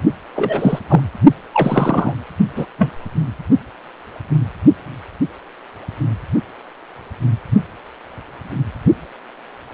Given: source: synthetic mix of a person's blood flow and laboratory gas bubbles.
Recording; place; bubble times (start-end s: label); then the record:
Doppler ultrasound of blood flow; precordium
0.36-0.79 s: bubbles
0.89-1.01 s: bubbles
1.53-2.13 s: bubbles
2.55-2.65 s: bubbles
2.78-2.92 s: bubbles
From the record:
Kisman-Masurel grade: 223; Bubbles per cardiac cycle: several, 3 to 8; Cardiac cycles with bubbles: 10 to 50%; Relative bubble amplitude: loud (0.450 to 0.775); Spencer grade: 2 (many but less than half of the cardiac periods contain bubble signals, singularly or in groups); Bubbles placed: only in the low amplitude regions of the cardiac cycle